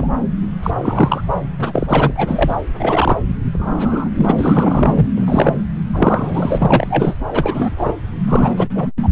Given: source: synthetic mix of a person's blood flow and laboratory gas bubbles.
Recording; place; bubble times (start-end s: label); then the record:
Doppler ultrasound of blood flow; subclavian vein
0.00-0.08 s: bubbles
0.62-0.71 s: bubbles
0.81-1.24 s: bubbles
1.58-2.12 s: bubbles
2.16-2.57 s: bubbles
2.79-3.18 s: bubbles
3.54-4.09 s: bubbles
4.17-4.33 s: bubbles
4.38-5.07 s: bubbles
5.17-5.56 s: bubbles
5.93-7.14 s: bubbles
7.30-7.73 s: bubbles
7.77-7.93 s: bubbles
8.26-8.54 s: bubbles
8.57-8.68 s: bubbles
8.74-8.91 s: bubbles
9.03-9.09 s: bubbles
From the record:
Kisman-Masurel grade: 243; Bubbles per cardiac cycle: several, 3 to 8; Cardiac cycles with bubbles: 100%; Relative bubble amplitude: loud (0.450 to 0.775); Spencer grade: 3 (all of the cardiac periods contain showers or single bubble signals, but not dominating or overriding the cardiac motion signals); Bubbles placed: anywhere in the cardiac cycle